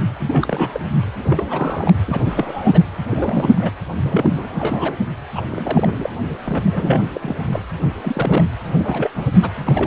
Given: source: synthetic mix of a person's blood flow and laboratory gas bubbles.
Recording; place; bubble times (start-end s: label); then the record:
Doppler ultrasound of blood flow; precordium
0.20-0.85 s: bubbles
1.17-1.99 s: bubbles
2.08-2.84 s: bubbles
3.09-3.73 s: bubbles
3.97-4.96 s: bubbles
5.35-5.42 s: bubbles
5.51-6.09 s: bubbles
6.45-6.62 s: bubbles
6.64-7.06 s: bubbles
7.13-7.36 s: bubbles
7.51-7.62 s: bubbles
8.03-8.46 s: bubbles
8.73-9.11 s: bubbles
9.14-9.27 s: bubbles
9.38-9.50 s: bubbles
9.66-9.87 s: bubbles
From the record:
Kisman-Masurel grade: 342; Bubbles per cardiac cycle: rolling drumbeat, 9 or more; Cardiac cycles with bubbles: 100%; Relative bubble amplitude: moderate (0.250 to 0.450); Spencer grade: 3 (all of the cardiac periods contain showers or single bubble signals, but not dominating or overriding the cardiac motion signals); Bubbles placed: anywhere in the cardiac cycle